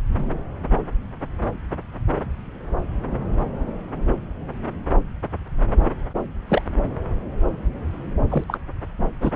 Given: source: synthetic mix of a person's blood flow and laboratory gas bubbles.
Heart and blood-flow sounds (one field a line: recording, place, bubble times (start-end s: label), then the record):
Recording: Doppler ultrasound of blood flow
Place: subclavian vein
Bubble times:
6.49-6.62 s: bubbles
8.29-8.44 s: bubbles
8.48-8.58 s: bubbles
9.20-9.31 s: bubbles
From the record:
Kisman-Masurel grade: 122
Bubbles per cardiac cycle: 1 to 2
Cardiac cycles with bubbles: 10 to 50%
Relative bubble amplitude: moderate (0.250 to 0.450)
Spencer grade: 2 (many but less than half of the cardiac periods contain bubble signals, singularly or in groups)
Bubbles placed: anywhere in the cardiac cycle